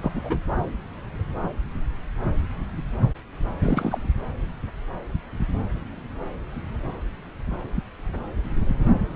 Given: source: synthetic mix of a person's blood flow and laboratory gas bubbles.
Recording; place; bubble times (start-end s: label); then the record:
Doppler ultrasound of blood flow; subclavian vein
0.00-0.12 s: bubbles
0.15-0.21 s: bubbles
0.24-0.37 s: bubbles
3.62-3.98 s: bubbles
From the record:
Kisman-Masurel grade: 212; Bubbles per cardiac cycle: several, 3 to 8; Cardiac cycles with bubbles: 1 to 10%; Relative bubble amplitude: moderate (0.250 to 0.450); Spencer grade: 1 (occasional bubble signal discernible with the cardiac motion signal, with majority of cardiac periods free of bubbles); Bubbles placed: anywhere in the cardiac cycle